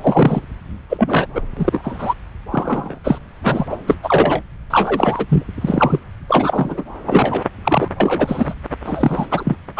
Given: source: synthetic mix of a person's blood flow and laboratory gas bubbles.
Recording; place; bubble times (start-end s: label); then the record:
Doppler ultrasound of blood flow; subclavian vein
0.00-0.40 s: bubbles
0.89-1.26 s: bubbles
1.33-1.42 s: bubbles
1.56-2.14 s: bubbles
2.52-2.99 s: bubbles
3.04-3.19 s: bubbles
3.43-3.66 s: bubbles
3.69-3.77 s: bubbles
3.87-3.95 s: bubbles
4.02-4.42 s: bubbles
4.70-5.25 s: bubbles
5.29-5.43 s: bubbles
5.61-6.00 s: bubbles
6.28-6.83 s: bubbles
7.06-7.43 s: bubbles
7.63-7.88 s: bubbles
8.00-8.54 s: bubbles
8.84-9.26 s: bubbles
9.31-9.56 s: bubbles
9.76-9.79 s: bubbles
From the record:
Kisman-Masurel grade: 243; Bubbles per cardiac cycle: several, 3 to 8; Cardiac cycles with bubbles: 100%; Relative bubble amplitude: loud (0.450 to 0.775); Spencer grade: 3 (all of the cardiac periods contain showers or single bubble signals, but not dominating or overriding the cardiac motion signals); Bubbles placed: anywhere in the cardiac cycle